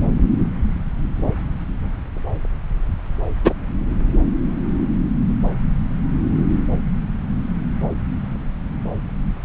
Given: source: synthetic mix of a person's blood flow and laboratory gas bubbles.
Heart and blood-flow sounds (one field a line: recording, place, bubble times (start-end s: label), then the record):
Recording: Doppler ultrasound of blood flow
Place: subclavian vein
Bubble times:
3.44-3.53 s: bubbles
From the record:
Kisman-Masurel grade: 113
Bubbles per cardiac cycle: 1 to 2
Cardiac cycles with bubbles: 1 to 10%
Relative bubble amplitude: loud (0.450 to 0.775)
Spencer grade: 1 (occasional bubble signal discernible with the cardiac motion signal, with majority of cardiac periods free of bubbles)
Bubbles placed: anywhere in the cardiac cycle